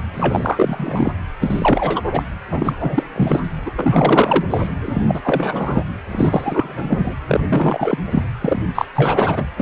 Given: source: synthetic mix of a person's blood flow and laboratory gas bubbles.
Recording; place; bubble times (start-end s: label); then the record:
Doppler ultrasound of blood flow; precordium
0.14-1.12 s: bubbles
1.41-2.02 s: bubbles
2.11-2.23 s: bubbles
2.51-2.74 s: bubbles
2.79-3.04 s: bubbles
3.16-3.40 s: bubbles
3.65-3.71 s: bubbles
3.75-4.45 s: bubbles
4.50-4.67 s: bubbles
4.84-5.03 s: bubbles
5.08-5.21 s: bubbles
5.24-5.83 s: bubbles
6.11-7.14 s: bubbles
7.28-7.41 s: bubbles
7.50-7.98 s: bubbles
8.04-8.22 s: bubbles
8.41-8.64 s: bubbles
8.74-8.86 s: bubbles
8.95-9.45 s: bubbles
9.57-9.62 s: bubbles
From the record:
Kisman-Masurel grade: 333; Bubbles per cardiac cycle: rolling drumbeat, 9 or more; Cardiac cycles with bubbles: 50 to 99%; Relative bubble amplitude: loud (0.450 to 0.775); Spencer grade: 3 (all of the cardiac periods contain showers or single bubble signals, but not dominating or overriding the cardiac motion signals); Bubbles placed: anywhere in the cardiac cycle